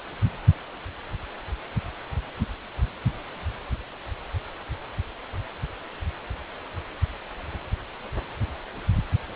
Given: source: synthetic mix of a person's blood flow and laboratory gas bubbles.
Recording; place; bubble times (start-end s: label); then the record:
Doppler ultrasound of blood flow; precordium
no bubbles
From the record:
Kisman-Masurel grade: 000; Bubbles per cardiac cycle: 0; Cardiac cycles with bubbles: 0%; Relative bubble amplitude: no bubbles discernible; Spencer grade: 0 (complete lack of bubble signals)